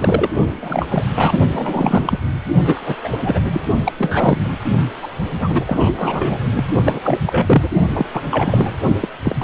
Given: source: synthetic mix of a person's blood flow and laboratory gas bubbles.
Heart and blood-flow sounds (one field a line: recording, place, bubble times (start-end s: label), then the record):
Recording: Doppler ultrasound of blood flow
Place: precordium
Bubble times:
0.00-0.28 s: bubbles
0.61-0.86 s: bubbles
0.89-1.03 s: bubbles
1.16-1.38 s: bubbles
1.52-2.19 s: bubbles
2.65-2.96 s: bubbles
3.04-3.39 s: bubbles
3.53-3.60 s: bubbles
3.84-3.92 s: bubbles
3.97-4.40 s: bubbles
4.44-4.58 s: bubbles
5.02-5.08 s: bubbles
5.39-6.39 s: bubbles
6.55-6.64 s: bubbles
6.86-7.00 s: bubbles
7.03-7.19 s: bubbles
7.27-7.69 s: bubbles
7.90-8.05 s: bubbles
8.14-8.22 s: bubbles
8.30-8.76 s: bubbles
9.01-9.08 s: bubbles
9.24-9.35 s: bubbles
9.40-9.44 s: bubbles
From the record:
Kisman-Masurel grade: 343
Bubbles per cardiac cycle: rolling drumbeat, 9 or more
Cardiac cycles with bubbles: 100%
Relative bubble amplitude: loud (0.450 to 0.775)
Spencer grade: 3 (all of the cardiac periods contain showers or single bubble signals, but not dominating or overriding the cardiac motion signals)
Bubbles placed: only in the low amplitude regions of the cardiac cycle